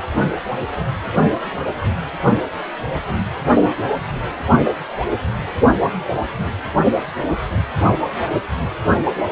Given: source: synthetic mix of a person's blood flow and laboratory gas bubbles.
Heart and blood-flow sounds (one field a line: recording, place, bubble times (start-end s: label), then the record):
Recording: Doppler ultrasound of blood flow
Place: precordium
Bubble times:
5.67-5.76 s: bubbles
8.90-8.98 s: bubbles
From the record:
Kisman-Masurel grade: 122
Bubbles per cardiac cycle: 1 to 2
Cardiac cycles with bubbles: 10 to 50%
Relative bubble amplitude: moderate (0.250 to 0.450)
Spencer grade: 2 (many but less than half of the cardiac periods contain bubble signals, singularly or in groups)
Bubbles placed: anywhere in the cardiac cycle